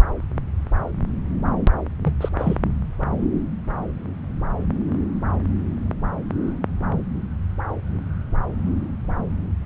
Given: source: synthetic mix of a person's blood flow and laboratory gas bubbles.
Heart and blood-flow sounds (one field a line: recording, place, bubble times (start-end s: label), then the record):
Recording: Doppler ultrasound of blood flow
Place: subclavian vein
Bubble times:
2.04-2.13 s: bubbles
2.21-2.29 s: bubbles
2.38-2.56 s: bubbles
From the record:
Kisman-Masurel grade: 212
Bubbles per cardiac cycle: several, 3 to 8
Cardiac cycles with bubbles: 1 to 10%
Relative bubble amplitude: moderate (0.250 to 0.450)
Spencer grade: 1 (occasional bubble signal discernible with the cardiac motion signal, with majority of cardiac periods free of bubbles)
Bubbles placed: anywhere in the cardiac cycle